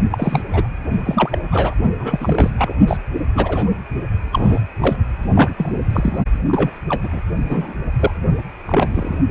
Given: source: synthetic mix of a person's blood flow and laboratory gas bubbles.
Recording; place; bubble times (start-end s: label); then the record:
Doppler ultrasound of blood flow; precordium
0.11-0.42 s: bubbles
0.53-0.68 s: bubbles
1.05-1.40 s: bubbles
1.51-1.75 s: bubbles
1.99-2.50 s: bubbles
2.58-2.73 s: bubbles
2.87-2.97 s: bubbles
3.35-3.69 s: bubbles
4.32-4.62 s: bubbles
4.80-4.96 s: bubbles
5.35-5.51 s: bubbles
5.57-5.72 s: bubbles
5.90-6.18 s: bubbles
6.46-6.71 s: bubbles
6.88-7.09 s: bubbles
7.12-7.21 s: bubbles
7.49-7.74 s: bubbles
7.98-8.11 s: bubbles
8.67-9.18 s: bubbles
From the record:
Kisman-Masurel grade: 243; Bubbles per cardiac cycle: several, 3 to 8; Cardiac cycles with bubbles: 100%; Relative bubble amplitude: loud (0.450 to 0.775); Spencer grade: 3 (all of the cardiac periods contain showers or single bubble signals, but not dominating or overriding the cardiac motion signals); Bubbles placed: only in the low amplitude regions of the cardiac cycle